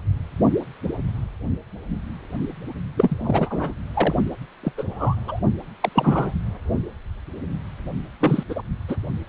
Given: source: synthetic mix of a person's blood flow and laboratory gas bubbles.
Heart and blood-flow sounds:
Doppler ultrasound of blood flow; precordium
2.97-3.73 s: bubbles
3.94-4.14 s: bubbles
4.63-4.72 s: bubbles
4.78-4.83 s: bubbles
4.91-5.41 s: bubbles
5.81-5.89 s: bubbles
5.92-6.34 s: bubbles
8.20-8.43 s: bubbles
8.49-8.62 s: bubbles
8.88-8.96 s: bubbles
From the record:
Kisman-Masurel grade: 222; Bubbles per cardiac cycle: several, 3 to 8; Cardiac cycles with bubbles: 10 to 50%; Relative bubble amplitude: moderate (0.250 to 0.450); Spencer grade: 2 (many but less than half of the cardiac periods contain bubble signals, singularly or in groups); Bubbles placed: only in the low amplitude regions of the cardiac cycle

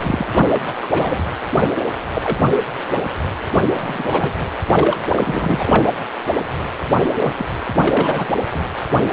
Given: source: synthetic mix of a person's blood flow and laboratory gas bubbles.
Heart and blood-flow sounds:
Doppler ultrasound of blood flow; precordium
0.00-0.27 s: bubbles
0.34-0.42 s: bubbles
0.53-0.61 s: bubbles
0.67-0.73 s: bubbles
0.82-1.25 s: bubbles
2.14-2.40 s: bubbles
3.51-3.62 s: bubbles
3.66-3.72 s: bubbles
3.76-4.04 s: bubbles
4.12-4.33 s: bubbles
4.66-5.89 s: bubbles
7.03-7.09 s: bubbles
7.20-7.35 s: bubbles
7.38-7.46 s: bubbles
7.81-8.34 s: bubbles
8.54-8.62 s: bubbles
8.93-9.03 s: bubbles
9.05-9.13 s: bubbles
From the record:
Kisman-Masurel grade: 232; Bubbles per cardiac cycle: several, 3 to 8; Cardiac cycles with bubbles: 50 to 99%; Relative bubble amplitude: moderate (0.250 to 0.450); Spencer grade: 3 (all of the cardiac periods contain showers or single bubble signals, but not dominating or overriding the cardiac motion signals); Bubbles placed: anywhere in the cardiac cycle

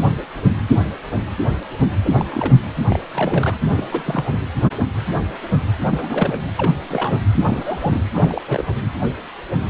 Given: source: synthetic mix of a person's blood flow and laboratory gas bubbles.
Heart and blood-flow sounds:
Doppler ultrasound of blood flow; precordium
2.04-2.27 s: bubbles
2.31-2.54 s: bubbles
2.89-2.99 s: bubbles
3.12-3.54 s: bubbles
3.71-3.84 s: bubbles
3.92-4.25 s: bubbles
4.31-4.37 s: bubbles
5.90-6.40 s: bubbles
6.55-6.72 s: bubbles
6.88-7.19 s: bubbles
7.32-8.02 s: bubbles
8.15-8.42 s: bubbles
8.47-8.66 s: bubbles
From the record:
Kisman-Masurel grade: 232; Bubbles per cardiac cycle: several, 3 to 8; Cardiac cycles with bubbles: 50 to 99%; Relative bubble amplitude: moderate (0.250 to 0.450); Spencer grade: 3 (all of the cardiac periods contain showers or single bubble signals, but not dominating or overriding the cardiac motion signals); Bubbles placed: anywhere in the cardiac cycle

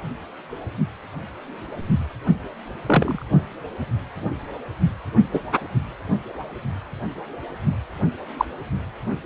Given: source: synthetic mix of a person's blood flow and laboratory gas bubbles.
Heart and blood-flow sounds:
Doppler ultrasound of blood flow; precordium
2.86-3.25 s: bubbles
5.33-5.39 s: bubbles
8.37-8.45 s: bubbles
From the record:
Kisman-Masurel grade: 123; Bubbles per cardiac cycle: 1 to 2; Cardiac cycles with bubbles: 10 to 50%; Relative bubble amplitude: loud (0.450 to 0.775); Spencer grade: 2 (many but less than half of the cardiac periods contain bubble signals, singularly or in groups); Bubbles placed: only in the low amplitude regions of the cardiac cycle

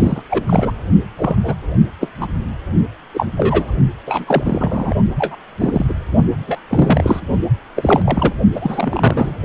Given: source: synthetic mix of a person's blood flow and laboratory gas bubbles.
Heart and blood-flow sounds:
Doppler ultrasound of blood flow; precordium
0.00-0.22 s: bubbles
0.30-0.71 s: bubbles
1.17-1.36 s: bubbles
1.43-1.55 s: bubbles
2.00-2.10 s: bubbles
2.20-2.27 s: bubbles
3.13-3.26 s: bubbles
3.37-3.72 s: bubbles
4.07-4.94 s: bubbles
5.18-5.36 s: bubbles
5.60-5.86 s: bubbles
5.89-5.94 s: bubbles
6.47-6.59 s: bubbles
6.69-7.20 s: bubbles
7.75-8.32 s: bubbles
8.55-9.35 s: bubbles
From the record:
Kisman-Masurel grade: 243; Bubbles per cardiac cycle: several, 3 to 8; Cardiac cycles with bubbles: 100%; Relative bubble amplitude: loud (0.450 to 0.775); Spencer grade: 3 (all of the cardiac periods contain showers or single bubble signals, but not dominating or overriding the cardiac motion signals); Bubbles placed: only in the low amplitude regions of the cardiac cycle

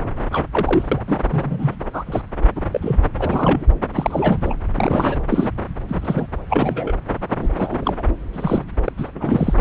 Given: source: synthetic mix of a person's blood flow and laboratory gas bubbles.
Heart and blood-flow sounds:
Doppler ultrasound of blood flow; subclavian vein
0.32-0.44 s: bubbles
0.52-0.88 s: bubbles
0.91-1.01 s: bubbles
1.07-1.21 s: bubbles
1.31-1.75 s: bubbles
1.93-2.04 s: bubbles
2.06-2.22 s: bubbles
2.56-2.61 s: bubbles
2.71-2.99 s: bubbles
3.18-3.65 s: bubbles
3.94-4.54 s: bubbles
4.75-5.18 s: bubbles
5.29-5.49 s: bubbles
5.88-6.27 s: bubbles
6.50-6.94 s: bubbles
7.37-7.49 s: bubbles
7.57-8.03 s: bubbles
8.33-8.64 s: bubbles
8.85-8.92 s: bubbles
8.97-9.09 s: bubbles
9.15-9.54 s: bubbles
From the record:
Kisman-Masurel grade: 242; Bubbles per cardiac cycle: several, 3 to 8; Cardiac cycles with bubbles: 100%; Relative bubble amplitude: moderate (0.250 to 0.450); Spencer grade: 3 (all of the cardiac periods contain showers or single bubble signals, but not dominating or overriding the cardiac motion signals); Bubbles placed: anywhere in the cardiac cycle

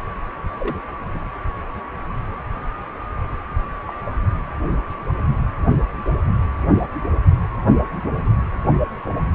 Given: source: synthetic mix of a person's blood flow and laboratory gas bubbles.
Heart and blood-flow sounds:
Doppler ultrasound of blood flow; precordium
0.59-0.79 s: bubbles
1.14-1.19 s: bubbles
3.88-3.92 s: bubbles
4.05-4.14 s: bubbles
9.05-9.09 s: bubbles
From the record:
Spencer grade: 2 (many but less than half of the cardiac periods contain bubble signals, singularly or in groups); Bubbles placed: anywhere in the cardiac cycle

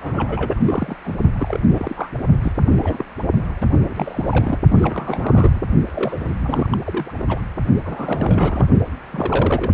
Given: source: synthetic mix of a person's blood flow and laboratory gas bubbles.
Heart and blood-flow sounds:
Doppler ultrasound of blood flow; precordium
0.00-0.61 s: bubbles
0.64-0.96 s: bubbles
1.04-1.15 s: bubbles
1.36-1.60 s: bubbles
1.69-2.10 s: bubbles
2.42-2.52 s: bubbles
2.67-3.05 s: bubbles
3.60-3.67 s: bubbles
3.72-4.58 s: bubbles
4.68-5.59 s: bubbles
5.86-6.77 s: bubbles
6.84-7.25 s: bubbles
7.28-7.40 s: bubbles
7.85-8.67 s: bubbles
9.12-9.72 s: bubbles
From the record:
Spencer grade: 3 (all of the cardiac periods contain showers or single bubble signals, but not dominating or overriding the cardiac motion signals); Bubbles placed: only in the low amplitude regions of the cardiac cycle

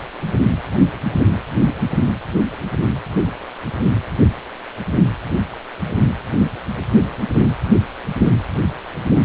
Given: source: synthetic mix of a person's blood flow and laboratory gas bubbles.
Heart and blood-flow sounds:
Doppler ultrasound of blood flow; precordium
no bubbles
From the record:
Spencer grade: 0 (complete lack of bubble signals)

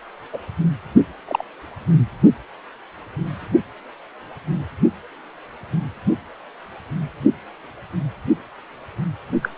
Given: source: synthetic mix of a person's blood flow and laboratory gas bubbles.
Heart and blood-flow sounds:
Doppler ultrasound of blood flow; precordium
0.33-0.38 s: bubbles
1.27-1.44 s: bubbles
9.42-9.48 s: bubbles
From the record:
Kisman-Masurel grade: 122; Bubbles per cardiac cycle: 1 to 2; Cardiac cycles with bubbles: 10 to 50%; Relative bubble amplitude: moderate (0.250 to 0.450); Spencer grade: 2 (many but less than half of the cardiac periods contain bubble signals, singularly or in groups); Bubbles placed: only in the low amplitude regions of the cardiac cycle

